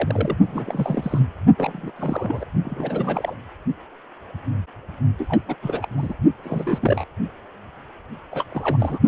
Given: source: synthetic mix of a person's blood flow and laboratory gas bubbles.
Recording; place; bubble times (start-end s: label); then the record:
Doppler ultrasound of blood flow; precordium
0.00-0.36 s: bubbles
0.43-1.27 s: bubbles
1.57-1.91 s: bubbles
1.96-2.46 s: bubbles
2.64-3.35 s: bubbles
5.18-5.42 s: bubbles
5.48-5.56 s: bubbles
5.62-5.87 s: bubbles
5.96-6.14 s: bubbles
6.44-6.79 s: bubbles
6.82-7.04 s: bubbles
8.31-8.44 s: bubbles
8.51-8.99 s: bubbles
9.06-9.08 s: bubbles
From the record:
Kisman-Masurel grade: 332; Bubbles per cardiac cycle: rolling drumbeat, 9 or more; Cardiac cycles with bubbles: 50 to 99%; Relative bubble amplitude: moderate (0.250 to 0.450); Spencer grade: 3 (all of the cardiac periods contain showers or single bubble signals, but not dominating or overriding the cardiac motion signals); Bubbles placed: only in the low amplitude regions of the cardiac cycle